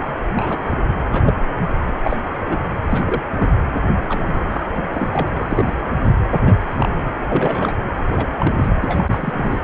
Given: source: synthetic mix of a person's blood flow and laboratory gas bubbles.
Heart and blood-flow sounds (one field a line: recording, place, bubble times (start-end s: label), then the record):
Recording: Doppler ultrasound of blood flow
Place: precordium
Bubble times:
0.35-0.76 s: bubbles
1.08-1.41 s: bubbles
1.87-1.93 s: bubbles
2.04-2.17 s: bubbles
2.46-2.68 s: bubbles
2.89-3.22 s: bubbles
3.36-3.50 s: bubbles
4.00-4.41 s: bubbles
4.50-4.67 s: bubbles
4.73-5.29 s: bubbles
5.36-5.80 s: bubbles
6.24-6.60 s: bubbles
6.77-7.04 s: bubbles
7.29-7.73 s: bubbles
7.95-8.37 s: bubbles
8.39-8.69 s: bubbles
8.81-9.04 s: bubbles
9.12-9.61 s: bubbles
From the record:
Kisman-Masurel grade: 232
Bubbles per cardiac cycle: several, 3 to 8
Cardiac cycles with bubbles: 50 to 99%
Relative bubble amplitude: moderate (0.250 to 0.450)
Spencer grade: 3 (all of the cardiac periods contain showers or single bubble signals, but not dominating or overriding the cardiac motion signals)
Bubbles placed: anywhere in the cardiac cycle